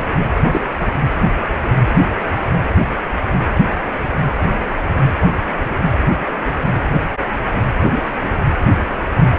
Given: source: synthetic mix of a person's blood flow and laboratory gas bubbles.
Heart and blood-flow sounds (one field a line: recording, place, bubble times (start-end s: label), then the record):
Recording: Doppler ultrasound of blood flow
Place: precordium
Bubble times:
0.51-0.62 s: bubbles
From the record:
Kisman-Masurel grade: 112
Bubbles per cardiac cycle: 1 to 2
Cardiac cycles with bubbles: 1 to 10%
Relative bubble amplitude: moderate (0.250 to 0.450)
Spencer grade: 1 (occasional bubble signal discernible with the cardiac motion signal, with majority of cardiac periods free of bubbles)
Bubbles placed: anywhere in the cardiac cycle